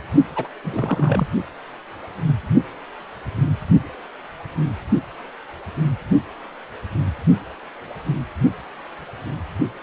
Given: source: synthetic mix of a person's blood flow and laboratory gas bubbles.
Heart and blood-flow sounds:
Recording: Doppler ultrasound of blood flow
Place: precordium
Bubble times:
0.35-0.47 s: bubbles
0.64-1.28 s: bubbles
From the record:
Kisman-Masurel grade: 212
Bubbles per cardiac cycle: several, 3 to 8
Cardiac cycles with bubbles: 1 to 10%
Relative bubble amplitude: moderate (0.250 to 0.450)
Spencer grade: 1 (occasional bubble signal discernible with the cardiac motion signal, with majority of cardiac periods free of bubbles)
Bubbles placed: only in the low amplitude regions of the cardiac cycle

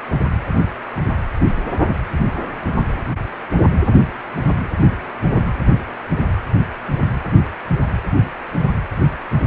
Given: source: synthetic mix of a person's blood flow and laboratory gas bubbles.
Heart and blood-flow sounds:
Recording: Doppler ultrasound of blood flow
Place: precordium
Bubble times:
no bubbles
From the record:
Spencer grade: 0 (complete lack of bubble signals)

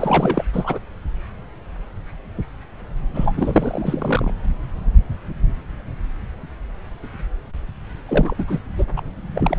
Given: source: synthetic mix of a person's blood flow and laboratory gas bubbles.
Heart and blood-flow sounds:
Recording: Doppler ultrasound of blood flow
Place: subclavian vein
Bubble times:
0.00-0.43 s: bubbles
0.53-0.78 s: bubbles
3.14-4.33 s: bubbles
8.08-8.45 s: bubbles
8.48-8.60 s: bubbles
8.78-8.85 s: bubbles
8.96-9.02 s: bubbles
9.35-9.59 s: bubbles
From the record:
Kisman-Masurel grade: 332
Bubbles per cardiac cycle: rolling drumbeat, 9 or more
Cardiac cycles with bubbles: 50 to 99%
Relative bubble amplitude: moderate (0.250 to 0.450)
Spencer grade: 3 (all of the cardiac periods contain showers or single bubble signals, but not dominating or overriding the cardiac motion signals)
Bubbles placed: anywhere in the cardiac cycle

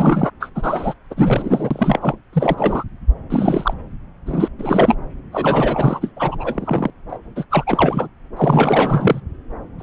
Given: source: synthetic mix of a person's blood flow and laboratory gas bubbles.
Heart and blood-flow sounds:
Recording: Doppler ultrasound of blood flow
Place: subclavian vein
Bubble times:
0.00-0.31 s: bubbles
0.40-0.49 s: bubbles
0.55-0.93 s: bubbles
1.10-2.15 s: bubbles
2.32-2.84 s: bubbles
3.30-3.73 s: bubbles
4.26-4.48 s: bubbles
4.58-4.96 s: bubbles
5.32-6.12 s: bubbles
6.16-6.90 s: bubbles
7.09-7.17 s: bubbles
7.35-7.45 s: bubbles
7.50-8.08 s: bubbles
8.37-9.20 s: bubbles
9.78-9.83 s: bubbles
From the record:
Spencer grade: 4 (maximum detectable bubble signal sounding continuously throughout systole and diastole of every cardiac period, and overriding the amplitude of the normal cardiac signals)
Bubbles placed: anywhere in the cardiac cycle

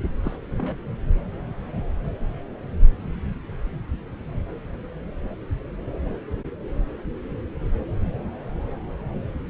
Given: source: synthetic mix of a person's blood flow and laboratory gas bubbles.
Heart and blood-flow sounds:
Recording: Doppler ultrasound of blood flow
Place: subclavian vein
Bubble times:
0.23-0.36 s: bubbles
0.58-0.75 s: bubbles
From the record:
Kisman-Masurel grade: 121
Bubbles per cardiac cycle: 1 to 2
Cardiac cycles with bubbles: 10 to 50%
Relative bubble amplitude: barely perceptible (0.100 to 0.250)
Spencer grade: 2 (many but less than half of the cardiac periods contain bubble signals, singularly or in groups)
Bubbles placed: anywhere in the cardiac cycle

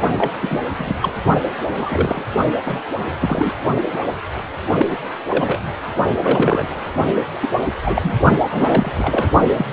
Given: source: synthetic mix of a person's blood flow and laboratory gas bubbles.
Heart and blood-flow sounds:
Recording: Doppler ultrasound of blood flow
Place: precordium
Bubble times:
0.18-0.32 s: bubbles
0.41-0.59 s: bubbles
0.78-0.94 s: bubbles
1.02-1.12 s: bubbles
1.77-2.25 s: bubbles
2.65-2.81 s: bubbles
3.21-3.51 s: bubbles
4.78-4.99 s: bubbles
5.28-5.59 s: bubbles
6.20-6.93 s: bubbles
7.41-7.48 s: bubbles
7.84-8.13 s: bubbles
8.49-9.30 s: bubbles
9.57-9.66 s: bubbles
From the record:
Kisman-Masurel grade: 243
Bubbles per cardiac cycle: several, 3 to 8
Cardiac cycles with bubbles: 100%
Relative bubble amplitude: loud (0.450 to 0.775)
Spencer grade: 3 (all of the cardiac periods contain showers or single bubble signals, but not dominating or overriding the cardiac motion signals)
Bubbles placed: only in the low amplitude regions of the cardiac cycle

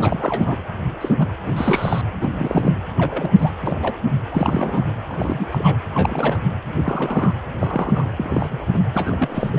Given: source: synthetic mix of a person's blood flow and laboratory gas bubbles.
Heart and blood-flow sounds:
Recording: Doppler ultrasound of blood flow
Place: precordium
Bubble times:
0.00-0.56 s: bubbles
1.00-1.15 s: bubbles
1.19-1.26 s: bubbles
1.46-1.53 s: bubbles
1.56-2.02 s: bubbles
2.21-2.77 s: bubbles
2.98-3.31 s: bubbles
3.38-3.52 s: bubbles
3.60-3.79 s: bubbles
3.82-3.96 s: bubbles
4.31-4.84 s: bubbles
5.07-5.46 s: bubbles
5.52-5.78 s: bubbles
5.94-6.38 s: bubbles
6.83-7.33 s: bubbles
7.58-8.10 s: bubbles
8.16-8.65 s: bubbles
8.72-8.80 s: bubbles
8.94-9.59 s: bubbles
From the record:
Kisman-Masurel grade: 242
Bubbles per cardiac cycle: several, 3 to 8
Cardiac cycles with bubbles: 100%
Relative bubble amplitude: moderate (0.250 to 0.450)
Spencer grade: 3 (all of the cardiac periods contain showers or single bubble signals, but not dominating or overriding the cardiac motion signals)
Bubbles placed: anywhere in the cardiac cycle

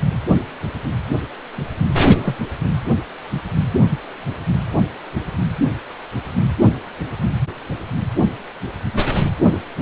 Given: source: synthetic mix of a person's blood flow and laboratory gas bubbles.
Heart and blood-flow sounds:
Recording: Doppler ultrasound of blood flow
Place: precordium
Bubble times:
2.09-2.36 s: bubbles
From the record:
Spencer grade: 1 (occasional bubble signal discernible with the cardiac motion signal, with majority of cardiac periods free of bubbles)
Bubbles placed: anywhere in the cardiac cycle

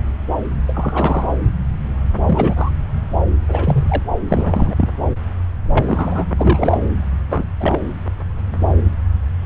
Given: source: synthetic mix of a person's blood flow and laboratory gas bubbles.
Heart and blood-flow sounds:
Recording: Doppler ultrasound of blood flow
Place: subclavian vein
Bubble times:
0.68-1.27 s: bubbles
2.27-2.71 s: bubbles
3.48-4.03 s: bubbles
4.28-4.88 s: bubbles
5.70-6.25 s: bubbles
6.37-6.78 s: bubbles
7.27-7.48 s: bubbles
7.60-7.80 s: bubbles
From the record:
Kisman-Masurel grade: 223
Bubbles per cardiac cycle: several, 3 to 8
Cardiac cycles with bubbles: 10 to 50%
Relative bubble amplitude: loud (0.450 to 0.775)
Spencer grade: 2 (many but less than half of the cardiac periods contain bubble signals, singularly or in groups)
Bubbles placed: anywhere in the cardiac cycle

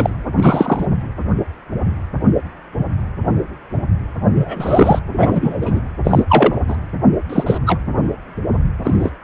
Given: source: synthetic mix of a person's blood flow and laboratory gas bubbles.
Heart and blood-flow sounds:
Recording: Doppler ultrasound of blood flow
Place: precordium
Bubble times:
0.00-0.10 s: bubbles
0.36-0.86 s: bubbles
4.34-4.99 s: bubbles
5.12-5.80 s: bubbles
6.03-6.23 s: bubbles
6.28-6.59 s: bubbles
6.68-6.76 s: bubbles
7.29-7.58 s: bubbles
7.66-7.79 s: bubbles
8.83-9.11 s: bubbles
From the record:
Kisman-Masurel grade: 233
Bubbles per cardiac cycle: several, 3 to 8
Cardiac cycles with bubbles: 50 to 99%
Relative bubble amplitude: loud (0.450 to 0.775)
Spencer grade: 3 (all of the cardiac periods contain showers or single bubble signals, but not dominating or overriding the cardiac motion signals)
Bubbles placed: anywhere in the cardiac cycle

